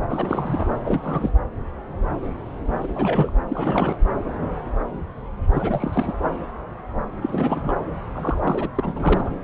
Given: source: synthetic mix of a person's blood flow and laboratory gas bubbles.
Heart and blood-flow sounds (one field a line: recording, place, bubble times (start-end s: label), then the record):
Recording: Doppler ultrasound of blood flow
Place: subclavian vein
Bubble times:
0.08-0.67 s: bubbles
0.85-1.31 s: bubbles
2.80-3.33 s: bubbles
3.48-3.97 s: bubbles
5.51-6.12 s: bubbles
7.21-7.74 s: bubbles
8.14-8.68 s: bubbles
8.75-9.31 s: bubbles
From the record:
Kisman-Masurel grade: 332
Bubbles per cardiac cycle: rolling drumbeat, 9 or more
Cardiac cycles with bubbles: 50 to 99%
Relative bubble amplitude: moderate (0.250 to 0.450)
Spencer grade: 3 (all of the cardiac periods contain showers or single bubble signals, but not dominating or overriding the cardiac motion signals)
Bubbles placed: anywhere in the cardiac cycle